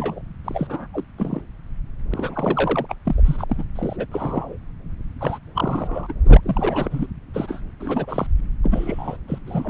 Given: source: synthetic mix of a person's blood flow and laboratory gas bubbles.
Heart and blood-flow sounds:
Doppler ultrasound of blood flow; subclavian vein
0.00-0.22 s: bubbles
0.44-0.87 s: bubbles
0.93-1.04 s: bubbles
1.18-1.41 s: bubbles
2.10-2.86 s: bubbles
2.88-2.96 s: bubbles
3.05-3.44 s: bubbles
3.49-3.64 s: bubbles
3.75-4.07 s: bubbles
4.12-4.57 s: bubbles
5.20-5.38 s: bubbles
5.54-6.13 s: bubbles
6.25-7.07 s: bubbles
7.33-7.61 s: bubbles
7.80-8.27 s: bubbles
8.63-9.17 s: bubbles
9.28-9.38 s: bubbles
9.46-9.70 s: bubbles
From the record:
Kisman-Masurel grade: 342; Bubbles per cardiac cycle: rolling drumbeat, 9 or more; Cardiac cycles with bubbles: 100%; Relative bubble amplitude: moderate (0.250 to 0.450); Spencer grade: 3 (all of the cardiac periods contain showers or single bubble signals, but not dominating or overriding the cardiac motion signals); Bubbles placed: anywhere in the cardiac cycle

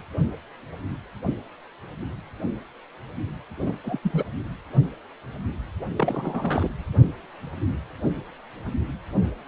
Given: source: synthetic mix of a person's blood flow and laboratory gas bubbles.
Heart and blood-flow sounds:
Doppler ultrasound of blood flow; precordium
3.64-3.76 s: bubbles
3.84-3.99 s: bubbles
4.03-4.23 s: bubbles
5.97-6.71 s: bubbles
From the record:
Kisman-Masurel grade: 221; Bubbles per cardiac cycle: several, 3 to 8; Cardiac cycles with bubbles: 10 to 50%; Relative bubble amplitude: barely perceptible (0.100 to 0.250); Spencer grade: 2 (many but less than half of the cardiac periods contain bubble signals, singularly or in groups); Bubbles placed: anywhere in the cardiac cycle

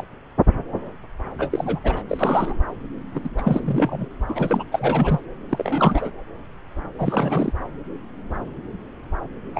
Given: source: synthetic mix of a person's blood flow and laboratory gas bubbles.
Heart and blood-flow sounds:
Doppler ultrasound of blood flow; subclavian vein
0.00-0.04 s: bubbles
1.38-1.79 s: bubbles
1.83-2.02 s: bubbles
2.08-2.56 s: bubbles
3.13-3.29 s: bubbles
3.38-4.08 s: bubbles
4.29-4.63 s: bubbles
4.71-5.20 s: bubbles
5.49-6.10 s: bubbles
6.99-7.53 s: bubbles
9.55-9.60 s: bubbles
From the record:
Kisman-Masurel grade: 332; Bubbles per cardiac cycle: rolling drumbeat, 9 or more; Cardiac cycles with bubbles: 50 to 99%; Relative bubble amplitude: moderate (0.250 to 0.450); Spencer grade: 3 (all of the cardiac periods contain showers or single bubble signals, but not dominating or overriding the cardiac motion signals); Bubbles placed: anywhere in the cardiac cycle

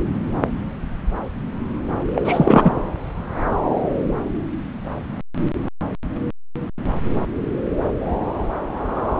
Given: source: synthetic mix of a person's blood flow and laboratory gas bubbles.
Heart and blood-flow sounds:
Doppler ultrasound of blood flow; subclavian vein
2.16-2.22 s: bubbles
2.24-2.71 s: bubbles
From the record:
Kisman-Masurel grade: 213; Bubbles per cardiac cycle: several, 3 to 8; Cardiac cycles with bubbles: 1 to 10%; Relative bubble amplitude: loud (0.450 to 0.775); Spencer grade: 1 (occasional bubble signal discernible with the cardiac motion signal, with majority of cardiac periods free of bubbles); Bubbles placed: anywhere in the cardiac cycle

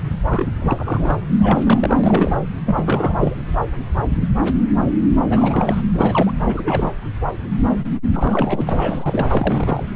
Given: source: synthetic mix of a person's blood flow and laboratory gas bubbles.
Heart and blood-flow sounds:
Doppler ultrasound of blood flow; subclavian vein
0.29-0.53 s: bubbles
0.61-1.18 s: bubbles
1.41-1.61 s: bubbles
1.65-1.97 s: bubbles
2.04-2.39 s: bubbles
2.65-2.83 s: bubbles
2.85-3.14 s: bubbles
3.19-3.35 s: bubbles
5.29-5.81 s: bubbles
5.95-6.34 s: bubbles
6.47-6.93 s: bubbles
8.13-8.70 s: bubbles
8.72-9.27 s: bubbles
9.32-9.84 s: bubbles
From the record:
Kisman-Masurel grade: 332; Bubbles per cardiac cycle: rolling drumbeat, 9 or more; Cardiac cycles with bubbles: 50 to 99%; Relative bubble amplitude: moderate (0.250 to 0.450); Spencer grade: 3 (all of the cardiac periods contain showers or single bubble signals, but not dominating or overriding the cardiac motion signals); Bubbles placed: anywhere in the cardiac cycle

